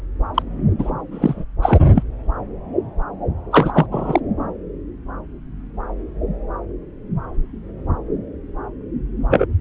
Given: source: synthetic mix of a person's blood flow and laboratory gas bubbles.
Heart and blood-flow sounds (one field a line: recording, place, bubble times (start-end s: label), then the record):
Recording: Doppler ultrasound of blood flow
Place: subclavian vein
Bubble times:
0.34-0.42 s: bubbles
0.78-0.91 s: bubbles
1.11-1.44 s: bubbles
1.62-1.80 s: bubbles
1.95-2.03 s: bubbles
3.50-3.86 s: bubbles
3.91-4.20 s: bubbles
9.29-9.46 s: bubbles
From the record:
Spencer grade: 2 (many but less than half of the cardiac periods contain bubble signals, singularly or in groups)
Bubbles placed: anywhere in the cardiac cycle